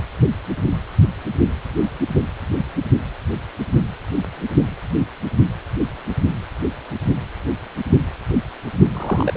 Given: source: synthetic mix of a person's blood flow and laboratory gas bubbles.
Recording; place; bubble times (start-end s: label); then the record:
Doppler ultrasound of blood flow; precordium
8.93-9.37 s: bubbles
From the record:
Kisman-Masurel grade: 122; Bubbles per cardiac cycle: 1 to 2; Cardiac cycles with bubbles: 10 to 50%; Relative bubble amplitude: moderate (0.250 to 0.450); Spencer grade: 2 (many but less than half of the cardiac periods contain bubble signals, singularly or in groups); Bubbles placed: only in the low amplitude regions of the cardiac cycle